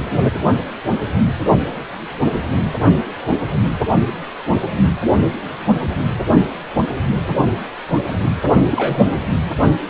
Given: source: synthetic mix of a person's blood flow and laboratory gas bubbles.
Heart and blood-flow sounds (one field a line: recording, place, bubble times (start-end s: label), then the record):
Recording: Doppler ultrasound of blood flow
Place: precordium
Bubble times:
8.71-9.00 s: bubbles
From the record:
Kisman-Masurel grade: 112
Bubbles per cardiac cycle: 1 to 2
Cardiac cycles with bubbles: 1 to 10%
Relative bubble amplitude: moderate (0.250 to 0.450)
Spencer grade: 1 (occasional bubble signal discernible with the cardiac motion signal, with majority of cardiac periods free of bubbles)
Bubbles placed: anywhere in the cardiac cycle